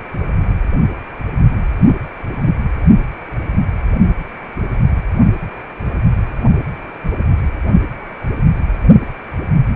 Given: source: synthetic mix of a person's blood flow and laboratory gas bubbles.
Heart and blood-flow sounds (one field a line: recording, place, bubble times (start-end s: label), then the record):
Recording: Doppler ultrasound of blood flow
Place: precordium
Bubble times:
1.83-1.96 s: bubbles
2.47-2.53 s: bubbles
From the record:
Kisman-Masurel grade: 112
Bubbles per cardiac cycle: 1 to 2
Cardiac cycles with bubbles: 1 to 10%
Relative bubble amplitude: moderate (0.250 to 0.450)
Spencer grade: 1 (occasional bubble signal discernible with the cardiac motion signal, with majority of cardiac periods free of bubbles)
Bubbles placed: only in the low amplitude regions of the cardiac cycle